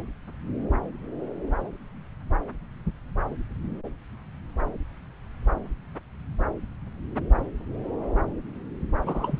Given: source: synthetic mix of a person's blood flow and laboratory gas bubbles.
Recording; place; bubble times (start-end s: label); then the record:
Doppler ultrasound of blood flow; subclavian vein
9.05-9.40 s: bubbles
From the record:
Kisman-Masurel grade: 211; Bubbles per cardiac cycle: several, 3 to 8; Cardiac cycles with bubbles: 1 to 10%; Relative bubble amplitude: barely perceptible (0.100 to 0.250); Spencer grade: 1 (occasional bubble signal discernible with the cardiac motion signal, with majority of cardiac periods free of bubbles); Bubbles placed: anywhere in the cardiac cycle